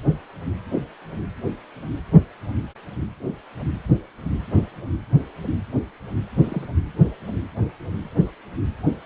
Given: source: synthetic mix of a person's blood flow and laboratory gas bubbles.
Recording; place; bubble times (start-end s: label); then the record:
Doppler ultrasound of blood flow; precordium
6.43-6.65 s: bubbles
From the record:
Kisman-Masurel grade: 112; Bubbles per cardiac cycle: 1 to 2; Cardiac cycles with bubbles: 1 to 10%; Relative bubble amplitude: moderate (0.250 to 0.450); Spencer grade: 1 (occasional bubble signal discernible with the cardiac motion signal, with majority of cardiac periods free of bubbles); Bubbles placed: anywhere in the cardiac cycle